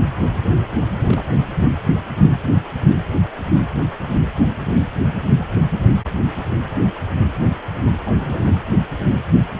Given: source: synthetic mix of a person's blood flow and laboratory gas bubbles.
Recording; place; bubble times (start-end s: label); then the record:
Doppler ultrasound of blood flow; precordium
1.02-1.25 s: bubbles
8.03-8.57 s: bubbles
From the record:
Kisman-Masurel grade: 211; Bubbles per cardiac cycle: several, 3 to 8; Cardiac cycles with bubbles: 1 to 10%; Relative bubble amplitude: barely perceptible (0.100 to 0.250); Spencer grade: 1 (occasional bubble signal discernible with the cardiac motion signal, with majority of cardiac periods free of bubbles); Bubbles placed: anywhere in the cardiac cycle